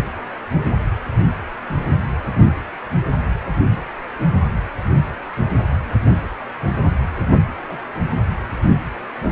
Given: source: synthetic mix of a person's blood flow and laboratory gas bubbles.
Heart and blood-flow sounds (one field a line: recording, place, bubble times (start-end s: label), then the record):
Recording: Doppler ultrasound of blood flow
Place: precordium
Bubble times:
7.69-7.79 s: bubbles
From the record:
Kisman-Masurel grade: 111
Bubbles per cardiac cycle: 1 to 2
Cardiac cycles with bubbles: 1 to 10%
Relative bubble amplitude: barely perceptible (0.100 to 0.250)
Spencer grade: 1 (occasional bubble signal discernible with the cardiac motion signal, with majority of cardiac periods free of bubbles)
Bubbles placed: anywhere in the cardiac cycle